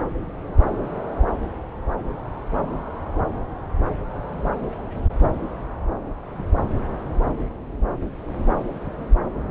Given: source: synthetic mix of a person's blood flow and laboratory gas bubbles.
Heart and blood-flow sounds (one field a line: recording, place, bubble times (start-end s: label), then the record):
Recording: Doppler ultrasound of blood flow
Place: subclavian vein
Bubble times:
no bubbles
From the record:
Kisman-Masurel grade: 000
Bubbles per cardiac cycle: 0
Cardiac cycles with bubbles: 0%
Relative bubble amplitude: no bubbles discernible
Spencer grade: 0 (complete lack of bubble signals)